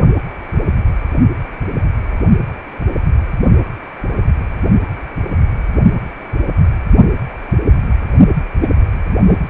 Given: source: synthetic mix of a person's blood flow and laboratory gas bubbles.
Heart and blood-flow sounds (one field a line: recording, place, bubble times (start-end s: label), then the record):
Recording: Doppler ultrasound of blood flow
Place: precordium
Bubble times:
8.62-8.67 s: bubbles
9.28-9.50 s: bubbles
From the record:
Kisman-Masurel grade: 211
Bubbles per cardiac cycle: several, 3 to 8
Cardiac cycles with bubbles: 1 to 10%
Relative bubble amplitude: barely perceptible (0.100 to 0.250)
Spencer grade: 1 (occasional bubble signal discernible with the cardiac motion signal, with majority of cardiac periods free of bubbles)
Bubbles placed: only in the low amplitude regions of the cardiac cycle